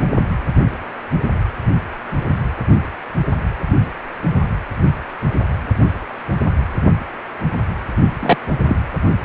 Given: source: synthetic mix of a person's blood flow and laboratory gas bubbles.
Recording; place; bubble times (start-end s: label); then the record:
Doppler ultrasound of blood flow; precordium
8.19-8.37 s: bubbles
8.62-8.76 s: bubbles
From the record:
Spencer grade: 1 (occasional bubble signal discernible with the cardiac motion signal, with majority of cardiac periods free of bubbles); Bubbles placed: anywhere in the cardiac cycle